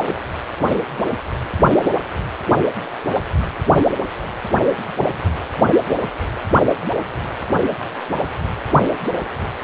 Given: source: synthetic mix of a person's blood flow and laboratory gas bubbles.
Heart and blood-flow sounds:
Doppler ultrasound of blood flow; precordium
no bubbles
From the record:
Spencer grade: 0 (complete lack of bubble signals)

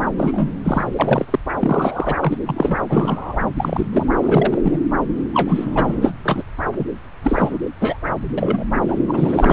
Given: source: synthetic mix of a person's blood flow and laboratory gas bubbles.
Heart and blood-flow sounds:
Doppler ultrasound of blood flow; subclavian vein
0.17-0.49 s: bubbles
0.64-0.84 s: bubbles
0.98-1.26 s: bubbles
1.30-1.39 s: bubbles
1.60-2.15 s: bubbles
2.20-2.37 s: bubbles
2.46-2.77 s: bubbles
2.89-3.38 s: bubbles
3.57-3.86 s: bubbles
3.93-4.07 s: bubbles
4.22-4.78 s: bubbles
5.33-6.12 s: bubbles
6.24-6.44 s: bubbles
6.79-6.85 s: bubbles
7.23-7.58 s: bubbles
7.79-7.97 s: bubbles
8.38-8.64 s: bubbles
8.88-8.97 s: bubbles
9.08-9.53 s: bubbles
From the record:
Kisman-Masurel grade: 243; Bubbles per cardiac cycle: several, 3 to 8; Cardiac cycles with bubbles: 100%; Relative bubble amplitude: loud (0.450 to 0.775); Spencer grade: 3 (all of the cardiac periods contain showers or single bubble signals, but not dominating or overriding the cardiac motion signals); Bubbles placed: anywhere in the cardiac cycle

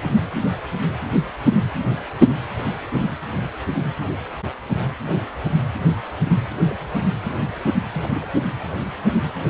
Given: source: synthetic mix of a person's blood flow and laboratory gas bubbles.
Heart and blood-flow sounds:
Doppler ultrasound of blood flow; precordium
6.61-7.15 s: bubbles
7.95-8.31 s: bubbles
8.34-8.37 s: bubbles
From the record:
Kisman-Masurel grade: 221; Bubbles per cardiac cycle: several, 3 to 8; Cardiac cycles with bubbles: 10 to 50%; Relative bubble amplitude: barely perceptible (0.100 to 0.250); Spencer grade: 2 (many but less than half of the cardiac periods contain bubble signals, singularly or in groups); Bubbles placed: anywhere in the cardiac cycle

